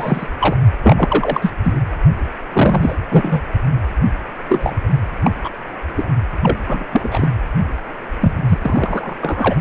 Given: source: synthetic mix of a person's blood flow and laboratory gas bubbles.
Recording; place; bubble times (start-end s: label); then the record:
Doppler ultrasound of blood flow; precordium
0.00-0.27 s: bubbles
0.41-0.56 s: bubbles
0.82-1.53 s: bubbles
1.64-1.80 s: bubbles
2.52-2.95 s: bubbles
3.09-3.42 s: bubbles
4.48-4.77 s: bubbles
5.25-5.31 s: bubbles
5.44-5.50 s: bubbles
5.96-6.04 s: bubbles
6.42-6.57 s: bubbles
6.68-6.84 s: bubbles
6.92-7.29 s: bubbles
8.21-8.32 s: bubbles
8.48-8.58 s: bubbles
8.62-9.13 s: bubbles
9.21-9.55 s: bubbles
From the record:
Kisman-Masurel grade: 243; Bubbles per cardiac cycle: several, 3 to 8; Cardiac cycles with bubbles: 100%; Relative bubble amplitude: loud (0.450 to 0.775); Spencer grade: 3 (all of the cardiac periods contain showers or single bubble signals, but not dominating or overriding the cardiac motion signals); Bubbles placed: anywhere in the cardiac cycle